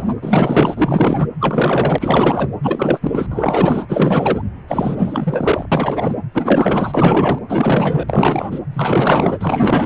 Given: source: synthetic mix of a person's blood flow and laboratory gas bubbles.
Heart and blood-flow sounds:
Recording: Doppler ultrasound of blood flow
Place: precordium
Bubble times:
0.00-0.13 s: bubbles
0.22-1.27 s: bubbles
1.40-2.50 s: bubbles
2.62-3.26 s: bubbles
3.31-3.86 s: bubbles
3.88-4.42 s: bubbles
4.67-5.66 s: bubbles
5.71-6.22 s: bubbles
6.33-7.38 s: bubbles
7.49-8.60 s: bubbles
8.73-9.86 s: bubbles
From the record:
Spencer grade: 4 (maximum detectable bubble signal sounding continuously throughout systole and diastole of every cardiac period, and overriding the amplitude of the normal cardiac signals)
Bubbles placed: anywhere in the cardiac cycle

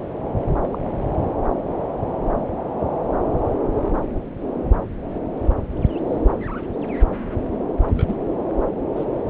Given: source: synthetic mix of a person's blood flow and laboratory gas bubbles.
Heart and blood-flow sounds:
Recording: Doppler ultrasound of blood flow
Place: subclavian vein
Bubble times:
0.63-0.78 s: bubbles
7.94-8.15 s: bubbles
8.96-9.04 s: bubbles
From the record:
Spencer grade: 2 (many but less than half of the cardiac periods contain bubble signals, singularly or in groups)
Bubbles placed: anywhere in the cardiac cycle

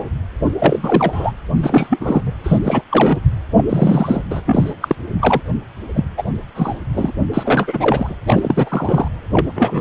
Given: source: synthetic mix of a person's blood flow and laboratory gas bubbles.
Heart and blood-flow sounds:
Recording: Doppler ultrasound of blood flow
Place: precordium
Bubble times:
0.59-1.31 s: bubbles
1.57-2.33 s: bubbles
2.44-2.60 s: bubbles
2.63-2.82 s: bubbles
2.89-3.19 s: bubbles
3.57-3.64 s: bubbles
3.68-4.21 s: bubbles
4.30-4.41 s: bubbles
4.45-4.74 s: bubbles
4.81-4.96 s: bubbles
5.21-5.41 s: bubbles
5.94-6.09 s: bubbles
6.17-6.23 s: bubbles
6.55-6.74 s: bubbles
6.93-7.12 s: bubbles
7.33-8.14 s: bubbles
8.26-9.08 s: bubbles
9.33-9.46 s: bubbles
9.55-9.81 s: bubbles
From the record:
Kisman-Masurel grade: 343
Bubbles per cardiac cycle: rolling drumbeat, 9 or more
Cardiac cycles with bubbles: 100%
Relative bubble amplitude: loud (0.450 to 0.775)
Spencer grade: 3 (all of the cardiac periods contain showers or single bubble signals, but not dominating or overriding the cardiac motion signals)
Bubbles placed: anywhere in the cardiac cycle

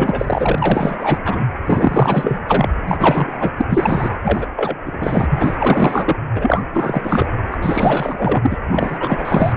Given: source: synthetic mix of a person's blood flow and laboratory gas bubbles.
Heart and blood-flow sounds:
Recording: Doppler ultrasound of blood flow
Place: precordium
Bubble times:
0.00-1.18 s: bubbles
1.25-1.43 s: bubbles
1.66-2.40 s: bubbles
2.47-2.69 s: bubbles
2.88-3.65 s: bubbles
3.69-4.17 s: bubbles
4.22-4.47 s: bubbles
4.55-4.75 s: bubbles
4.85-5.28 s: bubbles
5.32-6.17 s: bubbles
6.34-6.64 s: bubbles
6.73-7.28 s: bubbles
7.51-7.58 s: bubbles
7.62-8.57 s: bubbles
8.70-9.53 s: bubbles
From the record:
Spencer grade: 4 (maximum detectable bubble signal sounding continuously throughout systole and diastole of every cardiac period, and overriding the amplitude of the normal cardiac signals)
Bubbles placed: anywhere in the cardiac cycle

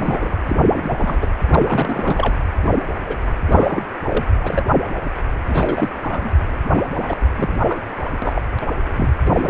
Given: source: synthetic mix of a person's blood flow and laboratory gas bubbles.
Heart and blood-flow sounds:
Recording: Doppler ultrasound of blood flow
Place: precordium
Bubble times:
0.00-0.38 s: bubbles
0.48-0.55 s: bubbles
0.62-1.26 s: bubbles
1.51-2.35 s: bubbles
3.07-3.16 s: bubbles
3.47-3.82 s: bubbles
4.08-4.25 s: bubbles
4.40-4.63 s: bubbles
5.47-5.89 s: bubbles
6.02-6.36 s: bubbles
6.76-6.82 s: bubbles
6.98-7.17 s: bubbles
7.36-7.59 s: bubbles
7.68-7.81 s: bubbles
8.04-8.09 s: bubbles
8.22-8.41 s: bubbles
8.61-8.67 s: bubbles
8.96-9.09 s: bubbles
9.25-9.50 s: bubbles
From the record:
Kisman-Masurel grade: 332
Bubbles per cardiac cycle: rolling drumbeat, 9 or more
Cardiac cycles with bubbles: 50 to 99%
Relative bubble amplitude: moderate (0.250 to 0.450)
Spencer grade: 3 (all of the cardiac periods contain showers or single bubble signals, but not dominating or overriding the cardiac motion signals)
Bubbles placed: anywhere in the cardiac cycle

